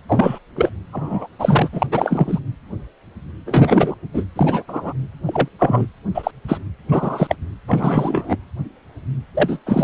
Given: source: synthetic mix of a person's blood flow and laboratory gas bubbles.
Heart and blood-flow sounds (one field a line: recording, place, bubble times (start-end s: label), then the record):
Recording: Doppler ultrasound of blood flow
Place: precordium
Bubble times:
0.08-0.39 s: bubbles
0.56-0.70 s: bubbles
0.92-1.27 s: bubbles
1.39-1.68 s: bubbles
1.72-1.86 s: bubbles
1.92-2.40 s: bubbles
3.46-3.95 s: bubbles
4.13-4.24 s: bubbles
4.35-4.62 s: bubbles
4.67-4.93 s: bubbles
5.25-5.48 s: bubbles
5.59-5.87 s: bubbles
6.14-6.31 s: bubbles
6.48-6.58 s: bubbles
6.88-7.35 s: bubbles
7.67-8.36 s: bubbles
9.34-9.58 s: bubbles
9.66-9.84 s: bubbles
From the record:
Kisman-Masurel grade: 233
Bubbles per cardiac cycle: several, 3 to 8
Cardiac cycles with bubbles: 50 to 99%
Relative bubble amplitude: loud (0.450 to 0.775)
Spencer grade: 3 (all of the cardiac periods contain showers or single bubble signals, but not dominating or overriding the cardiac motion signals)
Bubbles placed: anywhere in the cardiac cycle